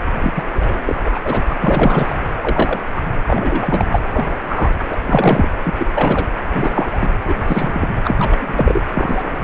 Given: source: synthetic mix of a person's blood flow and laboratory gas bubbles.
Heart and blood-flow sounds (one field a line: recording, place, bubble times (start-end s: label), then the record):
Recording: Doppler ultrasound of blood flow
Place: precordium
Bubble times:
0.19-0.43 s: bubbles
0.54-0.79 s: bubbles
0.88-0.97 s: bubbles
1.05-1.19 s: bubbles
1.24-1.45 s: bubbles
1.49-1.56 s: bubbles
1.61-2.17 s: bubbles
2.42-2.79 s: bubbles
2.96-3.02 s: bubbles
3.27-4.00 s: bubbles
4.13-4.36 s: bubbles
4.49-4.73 s: bubbles
4.89-4.96 s: bubbles
5.06-5.48 s: bubbles
5.64-5.74 s: bubbles
5.78-6.26 s: bubbles
6.53-7.09 s: bubbles
7.25-7.34 s: bubbles
7.47-7.88 s: bubbles
8.04-8.14 s: bubbles
8.18-8.81 s: bubbles
8.93-9.44 s: bubbles
From the record:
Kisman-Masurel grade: 243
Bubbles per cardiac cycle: several, 3 to 8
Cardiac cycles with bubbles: 100%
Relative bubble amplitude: loud (0.450 to 0.775)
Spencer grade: 3 (all of the cardiac periods contain showers or single bubble signals, but not dominating or overriding the cardiac motion signals)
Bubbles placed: anywhere in the cardiac cycle